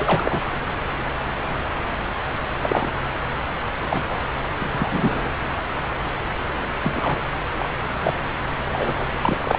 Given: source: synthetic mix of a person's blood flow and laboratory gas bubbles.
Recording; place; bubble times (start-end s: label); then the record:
Doppler ultrasound of blood flow; subclavian vein
0.00-0.44 s: bubbles
2.61-3.02 s: bubbles
3.89-4.02 s: bubbles
4.09-4.19 s: bubbles
4.59-4.68 s: bubbles
4.71-5.28 s: bubbles
6.81-7.20 s: bubbles
7.58-7.69 s: bubbles
8.03-8.13 s: bubbles
8.70-9.08 s: bubbles
9.22-9.59 s: bubbles
From the record:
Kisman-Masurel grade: 232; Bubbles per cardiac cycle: several, 3 to 8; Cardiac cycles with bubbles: 50 to 99%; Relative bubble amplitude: moderate (0.250 to 0.450); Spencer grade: 3 (all of the cardiac periods contain showers or single bubble signals, but not dominating or overriding the cardiac motion signals); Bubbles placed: anywhere in the cardiac cycle